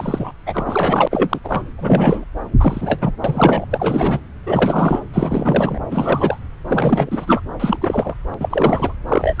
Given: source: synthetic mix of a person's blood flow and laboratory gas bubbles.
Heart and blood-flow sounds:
Doppler ultrasound of blood flow; subclavian vein
0.00-0.33 s: bubbles
0.46-1.08 s: bubbles
1.10-1.40 s: bubbles
1.44-1.62 s: bubbles
1.78-2.24 s: bubbles
2.59-3.12 s: bubbles
3.24-3.65 s: bubbles
3.69-4.21 s: bubbles
4.46-5.00 s: bubbles
5.14-5.79 s: bubbles
5.91-6.40 s: bubbles
6.65-7.42 s: bubbles
7.60-7.77 s: bubbles
7.81-8.14 s: bubbles
8.31-8.34 s: bubbles
8.39-8.93 s: bubbles
9.07-9.40 s: bubbles
From the record:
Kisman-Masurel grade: 343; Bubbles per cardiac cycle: rolling drumbeat, 9 or more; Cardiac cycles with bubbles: 100%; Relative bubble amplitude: loud (0.450 to 0.775); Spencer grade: 3 (all of the cardiac periods contain showers or single bubble signals, but not dominating or overriding the cardiac motion signals); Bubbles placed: anywhere in the cardiac cycle

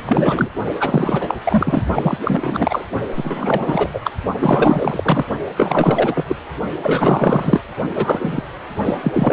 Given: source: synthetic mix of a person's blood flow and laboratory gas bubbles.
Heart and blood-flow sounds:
Doppler ultrasound of blood flow; precordium
0.05-0.49 s: bubbles
0.79-1.35 s: bubbles
1.45-1.83 s: bubbles
1.94-2.18 s: bubbles
2.25-2.85 s: bubbles
3.16-3.89 s: bubbles
3.93-4.00 s: bubbles
4.04-4.13 s: bubbles
4.37-5.25 s: bubbles
5.56-6.35 s: bubbles
6.82-7.61 s: bubbles
7.95-8.44 s: bubbles
8.85-8.95 s: bubbles
9.03-9.33 s: bubbles
From the record:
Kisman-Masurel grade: 444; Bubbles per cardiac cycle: continuous sound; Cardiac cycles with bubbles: 100%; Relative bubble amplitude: maximal (0.775 to 0.999); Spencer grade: 4 (maximum detectable bubble signal sounding continuously throughout systole and diastole of every cardiac period, and overriding the amplitude of the normal cardiac signals); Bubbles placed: only in the low amplitude regions of the cardiac cycle

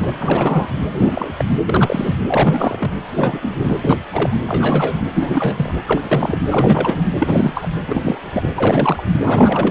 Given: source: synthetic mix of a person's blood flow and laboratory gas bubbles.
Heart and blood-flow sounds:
Doppler ultrasound of blood flow; precordium
0.00-0.11 s: bubbles
0.18-0.68 s: bubbles
0.91-1.45 s: bubbles
1.66-2.15 s: bubbles
2.27-2.95 s: bubbles
3.12-3.77 s: bubbles
3.84-4.00 s: bubbles
4.12-4.36 s: bubbles
4.47-5.02 s: bubbles
5.14-5.75 s: bubbles
5.86-6.38 s: bubbles
6.48-7.09 s: bubbles
7.18-7.68 s: bubbles
7.87-8.49 s: bubbles
8.55-9.03 s: bubbles
9.23-9.71 s: bubbles
From the record:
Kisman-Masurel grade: 342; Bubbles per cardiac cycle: rolling drumbeat, 9 or more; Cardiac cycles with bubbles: 100%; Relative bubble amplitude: moderate (0.250 to 0.450); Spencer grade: 3 (all of the cardiac periods contain showers or single bubble signals, but not dominating or overriding the cardiac motion signals); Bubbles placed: anywhere in the cardiac cycle

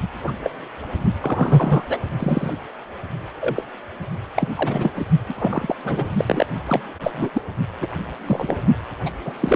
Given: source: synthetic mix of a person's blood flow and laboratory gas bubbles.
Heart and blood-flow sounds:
Doppler ultrasound of blood flow; precordium
0.01-0.07 s: bubbles
0.24-0.32 s: bubbles
0.44-0.50 s: bubbles
1.21-1.86 s: bubbles
1.89-1.98 s: bubbles
2.19-2.53 s: bubbles
3.41-3.65 s: bubbles
4.36-4.53 s: bubbles
4.55-4.91 s: bubbles
4.95-5.06 s: bubbles
5.28-5.33 s: bubbles
5.38-5.75 s: bubbles
5.83-6.05 s: bubbles
6.17-6.46 s: bubbles
6.66-6.81 s: bubbles
7.00-7.30 s: bubbles
7.33-7.42 s: bubbles
7.80-7.87 s: bubbles
8.26-8.56 s: bubbles
9.05-9.10 s: bubbles
9.25-9.32 s: bubbles
9.40-9.56 s: bubbles
From the record:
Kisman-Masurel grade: 242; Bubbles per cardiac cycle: several, 3 to 8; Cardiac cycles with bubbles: 100%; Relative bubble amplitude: moderate (0.250 to 0.450); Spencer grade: 3 (all of the cardiac periods contain showers or single bubble signals, but not dominating or overriding the cardiac motion signals); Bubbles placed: only in the low amplitude regions of the cardiac cycle

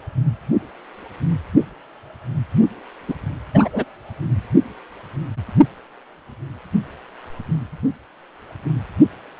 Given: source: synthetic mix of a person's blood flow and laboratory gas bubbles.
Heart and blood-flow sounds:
Doppler ultrasound of blood flow; precordium
3.08-3.14 s: bubbles
3.54-3.69 s: bubbles
3.73-3.84 s: bubbles
From the record:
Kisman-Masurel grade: 123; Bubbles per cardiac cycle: 1 to 2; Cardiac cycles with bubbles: 10 to 50%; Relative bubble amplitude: loud (0.450 to 0.775); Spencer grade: 2 (many but less than half of the cardiac periods contain bubble signals, singularly or in groups); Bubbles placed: anywhere in the cardiac cycle

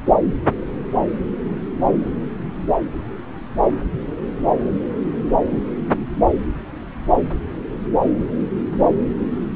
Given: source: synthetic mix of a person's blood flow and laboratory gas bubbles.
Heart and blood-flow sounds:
Doppler ultrasound of blood flow; subclavian vein
no bubbles
From the record:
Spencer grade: 0 (complete lack of bubble signals)

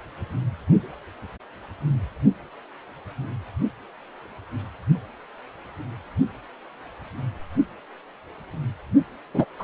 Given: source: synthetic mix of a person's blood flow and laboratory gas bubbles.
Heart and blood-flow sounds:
Doppler ultrasound of blood flow; precordium
9.34-9.45 s: bubbles
9.59-9.64 s: bubbles
From the record:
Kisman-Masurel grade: 213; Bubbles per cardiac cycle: several, 3 to 8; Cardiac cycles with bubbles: 1 to 10%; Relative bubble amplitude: loud (0.450 to 0.775); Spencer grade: 1 (occasional bubble signal discernible with the cardiac motion signal, with majority of cardiac periods free of bubbles); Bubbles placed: only in the low amplitude regions of the cardiac cycle

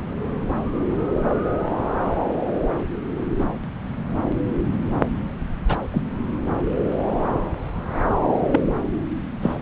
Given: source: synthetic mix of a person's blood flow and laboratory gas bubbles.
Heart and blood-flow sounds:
Doppler ultrasound of blood flow; subclavian vein
3.39-3.44 s: bubbles
5.68-5.77 s: bubbles
5.90-6.01 s: bubbles
8.51-8.61 s: bubbles
9.41-9.55 s: bubbles
From the record:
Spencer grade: 2 (many but less than half of the cardiac periods contain bubble signals, singularly or in groups); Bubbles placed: anywhere in the cardiac cycle

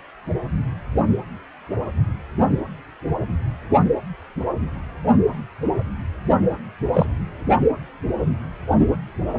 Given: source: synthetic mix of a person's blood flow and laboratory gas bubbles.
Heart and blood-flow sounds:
Doppler ultrasound of blood flow; precordium
6.93-7.06 s: bubbles
From the record:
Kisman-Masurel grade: 122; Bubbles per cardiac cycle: 1 to 2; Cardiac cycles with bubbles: 10 to 50%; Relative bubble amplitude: moderate (0.250 to 0.450); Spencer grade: 2 (many but less than half of the cardiac periods contain bubble signals, singularly or in groups); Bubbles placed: only in the low amplitude regions of the cardiac cycle

